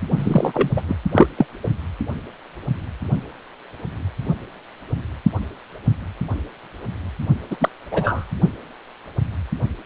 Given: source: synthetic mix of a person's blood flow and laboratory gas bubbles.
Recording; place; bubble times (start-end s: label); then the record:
Doppler ultrasound of blood flow; precordium
0.16-0.69 s: bubbles
0.76-0.82 s: bubbles
0.88-0.96 s: bubbles
1.11-1.27 s: bubbles
1.38-1.46 s: bubbles
1.64-1.69 s: bubbles
7.50-7.57 s: bubbles
7.60-7.69 s: bubbles
7.91-8.26 s: bubbles
From the record:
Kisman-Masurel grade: 223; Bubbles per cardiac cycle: several, 3 to 8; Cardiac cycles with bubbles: 10 to 50%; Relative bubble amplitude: loud (0.450 to 0.775); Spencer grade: 2 (many but less than half of the cardiac periods contain bubble signals, singularly or in groups); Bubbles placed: only in the low amplitude regions of the cardiac cycle